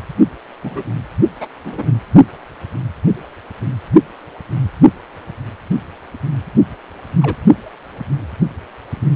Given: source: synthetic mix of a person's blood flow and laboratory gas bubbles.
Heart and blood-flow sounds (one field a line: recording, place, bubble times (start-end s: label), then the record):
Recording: Doppler ultrasound of blood flow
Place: precordium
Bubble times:
0.63-0.83 s: bubbles
1.40-1.47 s: bubbles
1.64-1.90 s: bubbles
7.20-7.37 s: bubbles
From the record:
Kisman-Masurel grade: 122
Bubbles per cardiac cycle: 1 to 2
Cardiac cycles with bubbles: 10 to 50%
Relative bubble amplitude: moderate (0.250 to 0.450)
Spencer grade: 2 (many but less than half of the cardiac periods contain bubble signals, singularly or in groups)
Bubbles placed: only in the low amplitude regions of the cardiac cycle